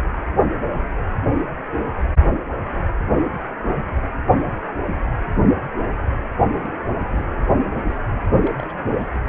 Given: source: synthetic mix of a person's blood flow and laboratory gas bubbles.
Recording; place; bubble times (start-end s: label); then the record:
Doppler ultrasound of blood flow; precordium
6.60-7.24 s: bubbles
7.88-7.96 s: bubbles
8.11-8.22 s: bubbles
8.42-8.53 s: bubbles
8.57-8.72 s: bubbles
9.14-9.20 s: bubbles
From the record:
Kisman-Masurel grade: 221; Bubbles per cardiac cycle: several, 3 to 8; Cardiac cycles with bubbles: 10 to 50%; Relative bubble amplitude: barely perceptible (0.100 to 0.250); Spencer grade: 2 (many but less than half of the cardiac periods contain bubble signals, singularly or in groups); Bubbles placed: anywhere in the cardiac cycle